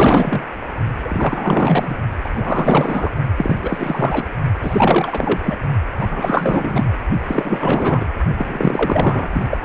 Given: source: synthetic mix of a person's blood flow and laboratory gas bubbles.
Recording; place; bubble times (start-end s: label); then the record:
Doppler ultrasound of blood flow; precordium
0.00-0.45 s: bubbles
1.04-1.96 s: bubbles
2.24-2.29 s: bubbles
2.33-3.11 s: bubbles
3.37-3.56 s: bubbles
3.62-4.24 s: bubbles
4.61-5.40 s: bubbles
5.42-5.57 s: bubbles
5.97-6.06 s: bubbles
6.09-6.88 s: bubbles
7.22-8.07 s: bubbles
8.38-9.29 s: bubbles
9.32-9.46 s: bubbles
9.50-9.57 s: bubbles
From the record:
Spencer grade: 4 (maximum detectable bubble signal sounding continuously throughout systole and diastole of every cardiac period, and overriding the amplitude of the normal cardiac signals); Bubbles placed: only in the low amplitude regions of the cardiac cycle